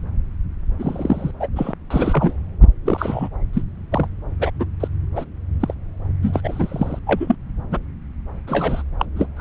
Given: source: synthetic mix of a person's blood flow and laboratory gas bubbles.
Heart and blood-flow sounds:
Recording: Doppler ultrasound of blood flow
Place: subclavian vein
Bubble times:
0.79-1.31 s: bubbles
1.40-1.48 s: bubbles
1.55-1.73 s: bubbles
1.90-2.33 s: bubbles
2.85-3.29 s: bubbles
3.53-3.62 s: bubbles
3.92-4.08 s: bubbles
4.39-4.50 s: bubbles
4.59-4.65 s: bubbles
4.80-4.88 s: bubbles
5.15-5.25 s: bubbles
5.60-5.73 s: bubbles
6.22-6.40 s: bubbles
6.43-6.99 s: bubbles
7.06-7.35 s: bubbles
7.71-7.80 s: bubbles
8.47-8.83 s: bubbles
8.99-9.05 s: bubbles
9.16-9.28 s: bubbles
9.37-9.41 s: bubbles
From the record:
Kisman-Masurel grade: 243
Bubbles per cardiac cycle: several, 3 to 8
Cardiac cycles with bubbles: 100%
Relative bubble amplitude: loud (0.450 to 0.775)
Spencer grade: 3 (all of the cardiac periods contain showers or single bubble signals, but not dominating or overriding the cardiac motion signals)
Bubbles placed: anywhere in the cardiac cycle

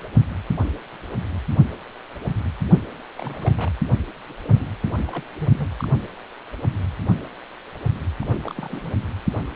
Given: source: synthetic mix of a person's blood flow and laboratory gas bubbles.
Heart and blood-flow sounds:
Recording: Doppler ultrasound of blood flow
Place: precordium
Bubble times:
3.17-3.70 s: bubbles
4.43-4.65 s: bubbles
4.82-4.90 s: bubbles
5.06-5.23 s: bubbles
5.39-5.67 s: bubbles
5.80-5.85 s: bubbles
8.20-8.54 s: bubbles
8.57-8.92 s: bubbles
From the record:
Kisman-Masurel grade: 221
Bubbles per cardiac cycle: several, 3 to 8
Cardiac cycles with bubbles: 10 to 50%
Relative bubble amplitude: barely perceptible (0.100 to 0.250)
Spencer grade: 2 (many but less than half of the cardiac periods contain bubble signals, singularly or in groups)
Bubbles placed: anywhere in the cardiac cycle

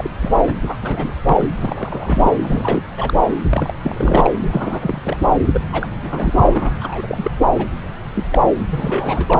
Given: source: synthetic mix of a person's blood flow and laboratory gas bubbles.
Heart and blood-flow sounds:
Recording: Doppler ultrasound of blood flow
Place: subclavian vein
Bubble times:
0.00-0.11 s: bubbles
0.20-0.30 s: bubbles
0.47-0.52 s: bubbles
0.62-0.77 s: bubbles
0.81-1.19 s: bubbles
1.25-1.48 s: bubbles
1.60-2.33 s: bubbles
2.42-2.81 s: bubbles
2.96-3.13 s: bubbles
3.50-3.74 s: bubbles
3.82-4.30 s: bubbles
4.44-5.17 s: bubbles
5.53-5.61 s: bubbles
5.72-5.88 s: bubbles
6.03-6.70 s: bubbles
6.80-7.31 s: bubbles
7.54-7.67 s: bubbles
8.16-8.25 s: bubbles
8.31-8.41 s: bubbles
8.69-9.40 s: bubbles
From the record:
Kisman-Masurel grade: 342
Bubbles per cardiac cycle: rolling drumbeat, 9 or more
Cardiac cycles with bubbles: 100%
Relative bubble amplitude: moderate (0.250 to 0.450)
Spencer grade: 3 (all of the cardiac periods contain showers or single bubble signals, but not dominating or overriding the cardiac motion signals)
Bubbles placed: anywhere in the cardiac cycle

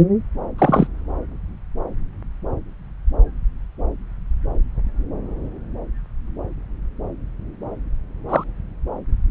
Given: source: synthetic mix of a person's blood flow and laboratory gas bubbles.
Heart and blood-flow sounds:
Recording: Doppler ultrasound of blood flow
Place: subclavian vein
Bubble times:
0.58-0.87 s: bubbles
8.28-8.44 s: bubbles
From the record:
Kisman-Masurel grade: 123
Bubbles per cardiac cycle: 1 to 2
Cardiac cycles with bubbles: 10 to 50%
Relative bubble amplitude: loud (0.450 to 0.775)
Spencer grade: 2 (many but less than half of the cardiac periods contain bubble signals, singularly or in groups)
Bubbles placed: anywhere in the cardiac cycle

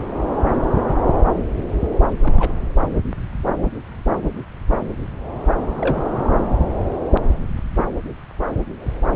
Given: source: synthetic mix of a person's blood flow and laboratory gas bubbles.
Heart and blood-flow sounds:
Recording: Doppler ultrasound of blood flow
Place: subclavian vein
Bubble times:
2.21-2.52 s: bubbles
5.79-6.03 s: bubbles
From the record:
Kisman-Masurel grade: 122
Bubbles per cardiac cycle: 1 to 2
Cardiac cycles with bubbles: 10 to 50%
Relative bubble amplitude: moderate (0.250 to 0.450)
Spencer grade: 2 (many but less than half of the cardiac periods contain bubble signals, singularly or in groups)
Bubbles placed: anywhere in the cardiac cycle

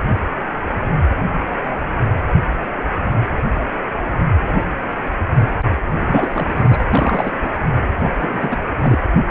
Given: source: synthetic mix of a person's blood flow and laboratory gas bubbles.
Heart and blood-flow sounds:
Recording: Doppler ultrasound of blood flow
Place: precordium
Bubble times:
5.97-6.85 s: bubbles
6.94-7.33 s: bubbles
7.42-7.50 s: bubbles
8.04-8.10 s: bubbles
8.20-8.57 s: bubbles
8.81-8.98 s: bubbles
From the record:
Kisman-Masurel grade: 332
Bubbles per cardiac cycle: rolling drumbeat, 9 or more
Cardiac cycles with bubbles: 50 to 99%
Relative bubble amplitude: moderate (0.250 to 0.450)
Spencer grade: 3 (all of the cardiac periods contain showers or single bubble signals, but not dominating or overriding the cardiac motion signals)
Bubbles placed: anywhere in the cardiac cycle

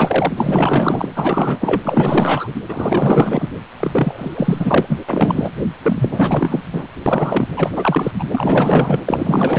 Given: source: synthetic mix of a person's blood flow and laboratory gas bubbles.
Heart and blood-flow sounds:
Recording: Doppler ultrasound of blood flow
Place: precordium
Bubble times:
0.00-0.33 s: bubbles
0.36-1.07 s: bubbles
1.15-1.81 s: bubbles
1.84-2.53 s: bubbles
2.68-3.50 s: bubbles
3.77-4.99 s: bubbles
5.08-5.52 s: bubbles
5.82-6.62 s: bubbles
6.72-6.88 s: bubbles
7.06-7.49 s: bubbles
7.57-8.12 s: bubbles
8.19-8.24 s: bubbles
8.31-9.02 s: bubbles
9.05-9.59 s: bubbles
From the record:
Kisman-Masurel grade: 444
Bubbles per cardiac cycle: continuous sound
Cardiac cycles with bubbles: 100%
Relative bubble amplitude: maximal (0.775 to 0.999)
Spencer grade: 4 (maximum detectable bubble signal sounding continuously throughout systole and diastole of every cardiac period, and overriding the amplitude of the normal cardiac signals)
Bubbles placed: anywhere in the cardiac cycle

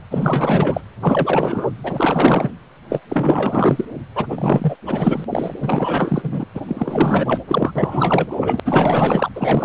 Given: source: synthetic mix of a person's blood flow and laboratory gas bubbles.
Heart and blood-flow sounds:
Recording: Doppler ultrasound of blood flow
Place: precordium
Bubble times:
0.10-0.81 s: bubbles
1.01-1.71 s: bubbles
1.83-2.52 s: bubbles
2.89-3.00 s: bubbles
3.08-3.85 s: bubbles
4.15-4.26 s: bubbles
4.30-4.76 s: bubbles
4.86-5.25 s: bubbles
5.29-5.54 s: bubbles
5.62-6.46 s: bubbles
6.54-6.62 s: bubbles
6.67-7.41 s: bubbles
7.47-7.72 s: bubbles
7.75-8.38 s: bubbles
8.41-8.60 s: bubbles
8.65-9.31 s: bubbles
9.35-9.65 s: bubbles
From the record:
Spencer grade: 4 (maximum detectable bubble signal sounding continuously throughout systole and diastole of every cardiac period, and overriding the amplitude of the normal cardiac signals)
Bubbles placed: anywhere in the cardiac cycle

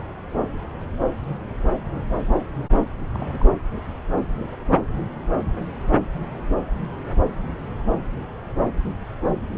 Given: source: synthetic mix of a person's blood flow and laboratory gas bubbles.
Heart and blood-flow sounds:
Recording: Doppler ultrasound of blood flow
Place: subclavian vein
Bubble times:
3.14-3.26 s: bubbles
3.31-3.46 s: bubbles
From the record:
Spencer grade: 1 (occasional bubble signal discernible with the cardiac motion signal, with majority of cardiac periods free of bubbles)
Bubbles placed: anywhere in the cardiac cycle

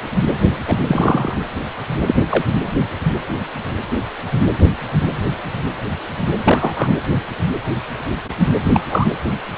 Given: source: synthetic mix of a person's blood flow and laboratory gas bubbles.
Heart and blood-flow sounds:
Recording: Doppler ultrasound of blood flow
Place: precordium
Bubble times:
0.67-0.79 s: bubbles
0.87-1.38 s: bubbles
2.07-2.16 s: bubbles
2.29-2.45 s: bubbles
6.45-6.92 s: bubbles
8.72-8.80 s: bubbles
8.89-9.07 s: bubbles
From the record:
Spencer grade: 2 (many but less than half of the cardiac periods contain bubble signals, singularly or in groups)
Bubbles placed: anywhere in the cardiac cycle

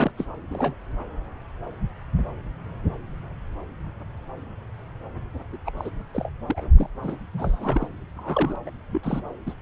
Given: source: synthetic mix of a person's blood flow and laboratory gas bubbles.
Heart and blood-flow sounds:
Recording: Doppler ultrasound of blood flow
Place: subclavian vein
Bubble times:
0.00-0.11 s: bubbles
0.18-0.27 s: bubbles
0.51-0.75 s: bubbles
5.52-5.57 s: bubbles
5.66-5.71 s: bubbles
5.77-5.91 s: bubbles
6.13-6.32 s: bubbles
6.46-6.62 s: bubbles
6.77-6.90 s: bubbles
7.03-7.16 s: bubbles
7.33-7.88 s: bubbles
8.16-8.56 s: bubbles
8.66-8.70 s: bubbles
8.92-9.23 s: bubbles
9.46-9.54 s: bubbles
From the record:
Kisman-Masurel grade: 332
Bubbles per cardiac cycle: rolling drumbeat, 9 or more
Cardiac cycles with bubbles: 50 to 99%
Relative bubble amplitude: moderate (0.250 to 0.450)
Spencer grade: 3 (all of the cardiac periods contain showers or single bubble signals, but not dominating or overriding the cardiac motion signals)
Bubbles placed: anywhere in the cardiac cycle

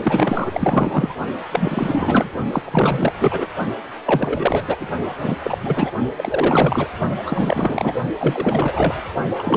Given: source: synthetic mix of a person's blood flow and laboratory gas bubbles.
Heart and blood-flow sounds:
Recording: Doppler ultrasound of blood flow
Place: precordium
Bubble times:
0.03-1.16 s: bubbles
1.51-2.31 s: bubbles
2.52-2.62 s: bubbles
2.64-3.12 s: bubbles
3.20-3.46 s: bubbles
4.05-4.77 s: bubbles
4.79-4.88 s: bubbles
5.17-5.37 s: bubbles
5.42-5.58 s: bubbles
5.62-5.91 s: bubbles
6.16-6.88 s: bubbles
7.25-7.96 s: bubbles
8.20-8.95 s: bubbles
9.38-9.57 s: bubbles
From the record:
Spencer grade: 4 (maximum detectable bubble signal sounding continuously throughout systole and diastole of every cardiac period, and overriding the amplitude of the normal cardiac signals)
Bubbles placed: only in the low amplitude regions of the cardiac cycle

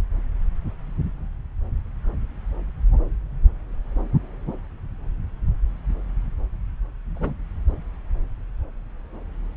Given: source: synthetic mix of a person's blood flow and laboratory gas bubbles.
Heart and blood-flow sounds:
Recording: Doppler ultrasound of blood flow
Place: subclavian vein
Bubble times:
7.15-7.34 s: bubbles
From the record:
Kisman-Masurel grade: 113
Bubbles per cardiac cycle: 1 to 2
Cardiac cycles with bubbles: 1 to 10%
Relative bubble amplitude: loud (0.450 to 0.775)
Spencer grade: 1 (occasional bubble signal discernible with the cardiac motion signal, with majority of cardiac periods free of bubbles)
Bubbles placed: anywhere in the cardiac cycle

